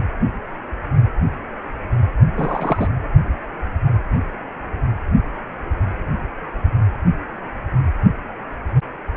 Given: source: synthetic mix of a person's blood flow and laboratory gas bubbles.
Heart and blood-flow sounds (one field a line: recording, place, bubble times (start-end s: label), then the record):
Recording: Doppler ultrasound of blood flow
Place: precordium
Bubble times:
2.36-2.88 s: bubbles
From the record:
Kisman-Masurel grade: 212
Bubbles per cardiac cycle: several, 3 to 8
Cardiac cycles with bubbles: 1 to 10%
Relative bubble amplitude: moderate (0.250 to 0.450)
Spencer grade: 1 (occasional bubble signal discernible with the cardiac motion signal, with majority of cardiac periods free of bubbles)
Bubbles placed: anywhere in the cardiac cycle